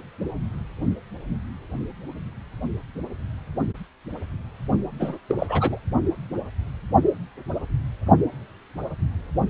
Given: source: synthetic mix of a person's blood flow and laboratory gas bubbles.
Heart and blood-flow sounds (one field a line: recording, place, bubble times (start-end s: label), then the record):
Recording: Doppler ultrasound of blood flow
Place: precordium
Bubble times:
4.99-5.18 s: bubbles
5.29-5.35 s: bubbles
5.39-5.79 s: bubbles
From the record:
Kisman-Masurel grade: 212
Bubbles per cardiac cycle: several, 3 to 8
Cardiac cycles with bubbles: 1 to 10%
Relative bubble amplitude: moderate (0.250 to 0.450)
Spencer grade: 1 (occasional bubble signal discernible with the cardiac motion signal, with majority of cardiac periods free of bubbles)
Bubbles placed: only in the low amplitude regions of the cardiac cycle